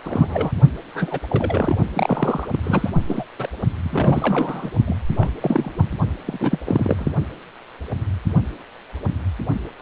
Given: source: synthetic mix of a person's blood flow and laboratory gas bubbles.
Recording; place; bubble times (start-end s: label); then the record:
Doppler ultrasound of blood flow; precordium
0.04-0.52 s: bubbles
0.94-1.19 s: bubbles
1.29-1.75 s: bubbles
1.94-2.46 s: bubbles
2.52-2.59 s: bubbles
2.63-2.90 s: bubbles
3.06-3.25 s: bubbles
3.38-3.48 s: bubbles
3.83-4.70 s: bubbles
4.87-4.96 s: bubbles
5.12-5.29 s: bubbles
5.41-5.71 s: bubbles
5.78-5.85 s: bubbles
6.26-6.59 s: bubbles
6.65-7.12 s: bubbles
From the record:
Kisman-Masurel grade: 332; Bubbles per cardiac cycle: rolling drumbeat, 9 or more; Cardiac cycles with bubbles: 50 to 99%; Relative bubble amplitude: moderate (0.250 to 0.450); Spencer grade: 3 (all of the cardiac periods contain showers or single bubble signals, but not dominating or overriding the cardiac motion signals); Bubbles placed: only in the low amplitude regions of the cardiac cycle